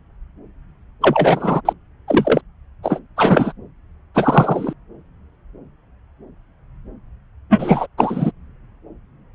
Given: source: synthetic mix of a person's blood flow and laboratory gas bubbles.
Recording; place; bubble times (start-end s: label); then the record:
Doppler ultrasound of blood flow; subclavian vein
1.01-1.61 s: bubbles
1.65-1.73 s: bubbles
2.08-2.41 s: bubbles
2.83-2.99 s: bubbles
3.17-3.53 s: bubbles
4.14-4.73 s: bubbles
7.50-7.86 s: bubbles
7.98-8.31 s: bubbles
From the record:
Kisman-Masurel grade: 223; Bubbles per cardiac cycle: several, 3 to 8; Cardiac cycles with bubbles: 10 to 50%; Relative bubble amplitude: loud (0.450 to 0.775); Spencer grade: 2 (many but less than half of the cardiac periods contain bubble signals, singularly or in groups); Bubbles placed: anywhere in the cardiac cycle